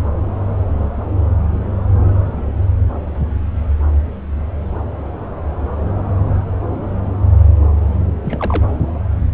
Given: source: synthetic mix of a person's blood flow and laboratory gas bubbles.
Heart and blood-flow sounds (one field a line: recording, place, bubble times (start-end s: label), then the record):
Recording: Doppler ultrasound of blood flow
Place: subclavian vein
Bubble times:
8.22-8.65 s: bubbles
From the record:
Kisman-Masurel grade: 211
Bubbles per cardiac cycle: several, 3 to 8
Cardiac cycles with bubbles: 1 to 10%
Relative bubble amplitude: barely perceptible (0.100 to 0.250)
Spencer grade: 1 (occasional bubble signal discernible with the cardiac motion signal, with majority of cardiac periods free of bubbles)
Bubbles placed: anywhere in the cardiac cycle